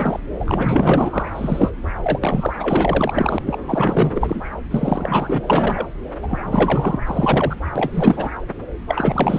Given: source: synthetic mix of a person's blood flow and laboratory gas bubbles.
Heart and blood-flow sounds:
Doppler ultrasound of blood flow; subclavian vein
0.00-0.20 s: bubbles
0.39-1.29 s: bubbles
1.35-1.73 s: bubbles
2.02-2.19 s: bubbles
2.21-3.38 s: bubbles
3.46-3.57 s: bubbles
3.67-4.43 s: bubbles
4.71-5.86 s: bubbles
6.22-7.00 s: bubbles
7.07-7.56 s: bubbles
7.75-8.29 s: bubbles
8.88-9.39 s: bubbles
From the record:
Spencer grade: 4 (maximum detectable bubble signal sounding continuously throughout systole and diastole of every cardiac period, and overriding the amplitude of the normal cardiac signals); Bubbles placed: anywhere in the cardiac cycle

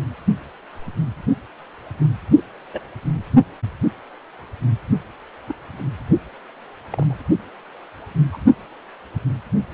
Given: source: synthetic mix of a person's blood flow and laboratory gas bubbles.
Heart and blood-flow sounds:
Doppler ultrasound of blood flow; precordium
2.37-2.42 s: bubbles
2.73-2.82 s: bubbles
5.48-5.55 s: bubbles
6.92-7.19 s: bubbles
8.32-8.38 s: bubbles
From the record:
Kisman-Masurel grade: 121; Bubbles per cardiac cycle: 1 to 2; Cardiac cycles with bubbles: 10 to 50%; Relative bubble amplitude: barely perceptible (0.100 to 0.250); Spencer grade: 2 (many but less than half of the cardiac periods contain bubble signals, singularly or in groups); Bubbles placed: only in the low amplitude regions of the cardiac cycle

